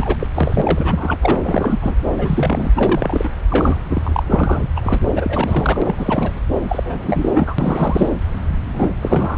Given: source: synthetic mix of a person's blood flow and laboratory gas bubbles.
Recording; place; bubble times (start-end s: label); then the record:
Doppler ultrasound of blood flow; subclavian vein
0.00-0.16 s: bubbles
0.20-0.27 s: bubbles
0.35-1.19 s: bubbles
1.21-1.40 s: bubbles
1.44-1.97 s: bubbles
2.07-2.71 s: bubbles
2.75-3.30 s: bubbles
3.50-3.80 s: bubbles
3.90-4.23 s: bubbles
4.29-4.69 s: bubbles
4.76-5.00 s: bubbles
5.15-5.96 s: bubbles
5.98-6.41 s: bubbles
6.69-7.54 s: bubbles
7.58-8.09 s: bubbles
8.73-8.88 s: bubbles
9.02-9.38 s: bubbles
From the record:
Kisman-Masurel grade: 342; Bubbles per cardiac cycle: rolling drumbeat, 9 or more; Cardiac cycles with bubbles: 100%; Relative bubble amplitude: moderate (0.250 to 0.450); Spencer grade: 3 (all of the cardiac periods contain showers or single bubble signals, but not dominating or overriding the cardiac motion signals); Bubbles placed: anywhere in the cardiac cycle